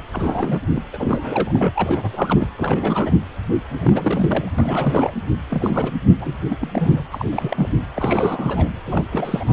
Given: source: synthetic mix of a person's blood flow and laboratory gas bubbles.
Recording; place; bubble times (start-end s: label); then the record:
Doppler ultrasound of blood flow; precordium
0.12-0.60 s: bubbles
0.70-0.83 s: bubbles
0.93-2.49 s: bubbles
2.57-3.16 s: bubbles
3.68-4.53 s: bubbles
4.58-5.12 s: bubbles
5.50-5.92 s: bubbles
6.21-6.36 s: bubbles
6.49-6.57 s: bubbles
6.61-7.04 s: bubbles
7.12-7.25 s: bubbles
7.32-7.69 s: bubbles
7.94-8.69 s: bubbles
8.85-9.04 s: bubbles
9.12-9.53 s: bubbles
From the record:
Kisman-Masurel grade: 342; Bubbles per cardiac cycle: rolling drumbeat, 9 or more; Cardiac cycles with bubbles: 100%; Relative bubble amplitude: moderate (0.250 to 0.450); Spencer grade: 3 (all of the cardiac periods contain showers or single bubble signals, but not dominating or overriding the cardiac motion signals); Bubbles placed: anywhere in the cardiac cycle